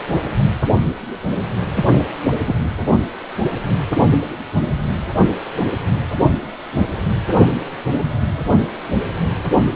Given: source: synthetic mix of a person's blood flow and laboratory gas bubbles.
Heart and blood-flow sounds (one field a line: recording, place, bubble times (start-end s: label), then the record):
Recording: Doppler ultrasound of blood flow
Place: precordium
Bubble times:
1.76-1.92 s: bubbles
2.47-2.54 s: bubbles
From the record:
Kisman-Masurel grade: 113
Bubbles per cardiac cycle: 1 to 2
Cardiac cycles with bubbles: 1 to 10%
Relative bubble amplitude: loud (0.450 to 0.775)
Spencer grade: 1 (occasional bubble signal discernible with the cardiac motion signal, with majority of cardiac periods free of bubbles)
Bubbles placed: only in the low amplitude regions of the cardiac cycle